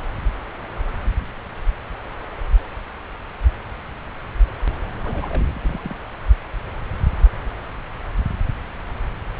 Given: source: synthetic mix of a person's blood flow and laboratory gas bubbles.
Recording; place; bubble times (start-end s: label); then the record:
Doppler ultrasound of blood flow; subclavian vein
5.04-5.59 s: bubbles
5.63-5.96 s: bubbles
From the record:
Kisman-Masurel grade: 221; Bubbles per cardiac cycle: several, 3 to 8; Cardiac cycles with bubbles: 10 to 50%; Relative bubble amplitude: barely perceptible (0.100 to 0.250); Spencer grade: 2 (many but less than half of the cardiac periods contain bubble signals, singularly or in groups); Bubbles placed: anywhere in the cardiac cycle